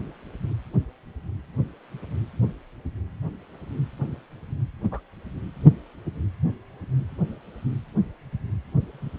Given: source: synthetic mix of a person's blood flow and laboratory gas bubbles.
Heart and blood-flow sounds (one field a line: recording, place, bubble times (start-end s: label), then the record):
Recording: Doppler ultrasound of blood flow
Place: precordium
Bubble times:
4.83-5.00 s: bubbles
8.86-9.10 s: bubbles
From the record:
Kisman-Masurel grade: 121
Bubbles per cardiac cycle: 1 to 2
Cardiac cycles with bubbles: 10 to 50%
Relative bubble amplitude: barely perceptible (0.100 to 0.250)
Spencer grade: 2 (many but less than half of the cardiac periods contain bubble signals, singularly or in groups)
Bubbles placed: anywhere in the cardiac cycle